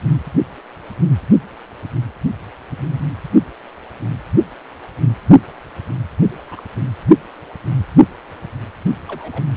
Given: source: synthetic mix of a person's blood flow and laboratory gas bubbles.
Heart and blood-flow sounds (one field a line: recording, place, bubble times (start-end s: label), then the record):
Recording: Doppler ultrasound of blood flow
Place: precordium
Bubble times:
6.47-6.62 s: bubbles
9.08-9.43 s: bubbles
From the record:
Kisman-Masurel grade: 121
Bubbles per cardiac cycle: 1 to 2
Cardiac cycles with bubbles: 10 to 50%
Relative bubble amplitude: barely perceptible (0.100 to 0.250)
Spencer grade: 2 (many but less than half of the cardiac periods contain bubble signals, singularly or in groups)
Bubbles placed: only in the low amplitude regions of the cardiac cycle